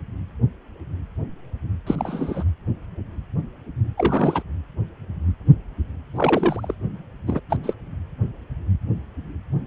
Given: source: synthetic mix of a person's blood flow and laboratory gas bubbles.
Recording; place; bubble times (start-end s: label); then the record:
Doppler ultrasound of blood flow; precordium
1.86-2.44 s: bubbles
3.98-4.43 s: bubbles
6.15-6.74 s: bubbles
7.27-7.40 s: bubbles
7.49-7.57 s: bubbles
7.63-7.74 s: bubbles
From the record:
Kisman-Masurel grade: 222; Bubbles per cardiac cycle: several, 3 to 8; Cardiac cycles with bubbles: 10 to 50%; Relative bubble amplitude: moderate (0.250 to 0.450); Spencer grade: 2 (many but less than half of the cardiac periods contain bubble signals, singularly or in groups); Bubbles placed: anywhere in the cardiac cycle